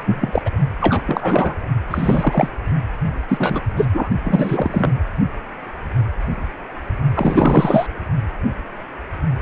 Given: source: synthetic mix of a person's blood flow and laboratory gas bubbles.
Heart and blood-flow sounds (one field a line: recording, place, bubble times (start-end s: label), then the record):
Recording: Doppler ultrasound of blood flow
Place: precordium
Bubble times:
0.00-0.04 s: bubbles
0.06-0.42 s: bubbles
0.46-0.50 s: bubbles
0.81-1.02 s: bubbles
1.07-1.55 s: bubbles
1.90-2.49 s: bubbles
3.28-3.61 s: bubbles
3.77-3.85 s: bubbles
3.93-4.10 s: bubbles
4.24-4.92 s: bubbles
7.15-7.87 s: bubbles
From the record:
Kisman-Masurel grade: 333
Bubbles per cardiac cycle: rolling drumbeat, 9 or more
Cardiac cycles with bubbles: 50 to 99%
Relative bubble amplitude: loud (0.450 to 0.775)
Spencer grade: 3 (all of the cardiac periods contain showers or single bubble signals, but not dominating or overriding the cardiac motion signals)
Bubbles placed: only in the low amplitude regions of the cardiac cycle